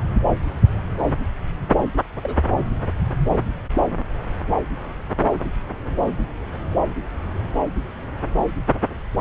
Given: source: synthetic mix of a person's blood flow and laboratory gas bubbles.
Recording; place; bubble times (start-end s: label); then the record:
Doppler ultrasound of blood flow; subclavian vein
2.23-2.37 s: bubbles
From the record:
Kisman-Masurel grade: 121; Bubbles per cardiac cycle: 1 to 2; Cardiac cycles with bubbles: 10 to 50%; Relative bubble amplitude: barely perceptible (0.100 to 0.250); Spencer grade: 2 (many but less than half of the cardiac periods contain bubble signals, singularly or in groups); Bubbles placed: anywhere in the cardiac cycle